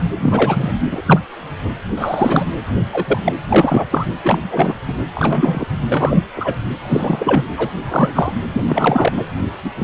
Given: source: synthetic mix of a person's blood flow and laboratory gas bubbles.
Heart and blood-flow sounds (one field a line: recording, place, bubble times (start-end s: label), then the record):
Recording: Doppler ultrasound of blood flow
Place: precordium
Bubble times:
0.17-0.75 s: bubbles
0.91-1.02 s: bubbles
1.05-1.19 s: bubbles
1.97-2.46 s: bubbles
2.92-3.18 s: bubbles
3.24-3.33 s: bubbles
3.48-3.84 s: bubbles
3.91-4.07 s: bubbles
4.24-4.41 s: bubbles
4.51-4.76 s: bubbles
4.88-4.94 s: bubbles
5.15-5.65 s: bubbles
5.89-6.22 s: bubbles
6.36-6.58 s: bubbles
6.88-7.48 s: bubbles
7.57-7.70 s: bubbles
7.83-8.34 s: bubbles
8.54-9.23 s: bubbles
9.62-9.71 s: bubbles
9.78-9.83 s: bubbles
From the record:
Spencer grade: 3 (all of the cardiac periods contain showers or single bubble signals, but not dominating or overriding the cardiac motion signals)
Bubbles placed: anywhere in the cardiac cycle